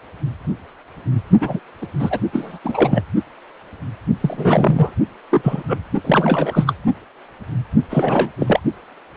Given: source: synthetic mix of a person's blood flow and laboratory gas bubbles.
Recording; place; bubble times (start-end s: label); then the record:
Doppler ultrasound of blood flow; precordium
1.41-1.60 s: bubbles
1.81-1.87 s: bubbles
2.00-2.21 s: bubbles
2.33-2.59 s: bubbles
2.64-3.04 s: bubbles
4.21-4.94 s: bubbles
5.30-5.63 s: bubbles
5.67-5.78 s: bubbles
6.04-6.74 s: bubbles
7.90-8.30 s: bubbles
8.40-8.60 s: bubbles
From the record:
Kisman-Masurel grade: 233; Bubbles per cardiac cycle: several, 3 to 8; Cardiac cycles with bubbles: 50 to 99%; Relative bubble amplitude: loud (0.450 to 0.775); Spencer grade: 3 (all of the cardiac periods contain showers or single bubble signals, but not dominating or overriding the cardiac motion signals); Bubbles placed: only in the low amplitude regions of the cardiac cycle